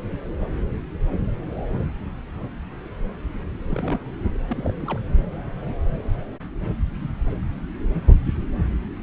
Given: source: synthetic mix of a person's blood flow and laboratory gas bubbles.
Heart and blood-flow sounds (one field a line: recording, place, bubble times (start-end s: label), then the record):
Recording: Doppler ultrasound of blood flow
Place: subclavian vein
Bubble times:
3.69-4.10 s: bubbles
4.48-4.74 s: bubbles
4.82-4.99 s: bubbles
From the record:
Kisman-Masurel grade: 211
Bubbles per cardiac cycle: several, 3 to 8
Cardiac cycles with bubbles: 1 to 10%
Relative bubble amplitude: barely perceptible (0.100 to 0.250)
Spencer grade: 1 (occasional bubble signal discernible with the cardiac motion signal, with majority of cardiac periods free of bubbles)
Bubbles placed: anywhere in the cardiac cycle